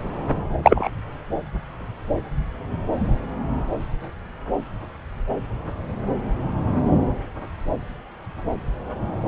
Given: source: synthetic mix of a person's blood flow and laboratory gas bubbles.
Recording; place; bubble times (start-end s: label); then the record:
Doppler ultrasound of blood flow; subclavian vein
0.63-0.89 s: bubbles
From the record:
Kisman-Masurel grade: 113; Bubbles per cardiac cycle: 1 to 2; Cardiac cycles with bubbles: 1 to 10%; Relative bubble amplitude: loud (0.450 to 0.775); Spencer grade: 1 (occasional bubble signal discernible with the cardiac motion signal, with majority of cardiac periods free of bubbles); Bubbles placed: anywhere in the cardiac cycle